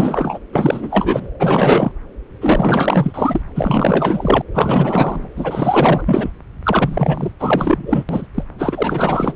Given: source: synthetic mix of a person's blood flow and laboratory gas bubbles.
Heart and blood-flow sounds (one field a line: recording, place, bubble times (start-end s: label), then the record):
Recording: Doppler ultrasound of blood flow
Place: subclavian vein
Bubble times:
0.00-0.39 s: bubbles
0.52-1.28 s: bubbles
1.39-1.92 s: bubbles
2.41-3.41 s: bubbles
3.54-4.42 s: bubbles
4.54-5.28 s: bubbles
5.36-6.31 s: bubbles
6.63-7.32 s: bubbles
7.39-8.04 s: bubbles
8.09-8.26 s: bubbles
8.34-8.44 s: bubbles
8.58-9.35 s: bubbles
From the record:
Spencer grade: 4 (maximum detectable bubble signal sounding continuously throughout systole and diastole of every cardiac period, and overriding the amplitude of the normal cardiac signals)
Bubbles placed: anywhere in the cardiac cycle